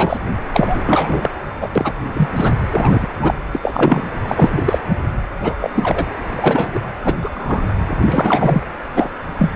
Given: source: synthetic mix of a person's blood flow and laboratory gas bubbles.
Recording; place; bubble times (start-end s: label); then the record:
Doppler ultrasound of blood flow; precordium
0.00-0.17 s: bubbles
0.53-1.31 s: bubbles
1.61-1.70 s: bubbles
1.75-1.94 s: bubbles
2.14-2.29 s: bubbles
2.36-2.52 s: bubbles
2.71-3.08 s: bubbles
3.21-3.34 s: bubbles
3.52-4.08 s: bubbles
4.27-4.78 s: bubbles
4.89-4.95 s: bubbles
5.42-5.56 s: bubbles
5.60-5.70 s: bubbles
5.76-6.06 s: bubbles
6.37-6.80 s: bubbles
7.03-7.15 s: bubbles
7.21-7.30 s: bubbles
7.32-7.75 s: bubbles
8.04-8.62 s: bubbles
8.95-9.09 s: bubbles
9.38-9.50 s: bubbles
From the record:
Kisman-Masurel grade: 243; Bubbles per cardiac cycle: several, 3 to 8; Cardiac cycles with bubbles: 100%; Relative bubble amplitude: loud (0.450 to 0.775); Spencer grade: 3 (all of the cardiac periods contain showers or single bubble signals, but not dominating or overriding the cardiac motion signals); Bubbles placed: anywhere in the cardiac cycle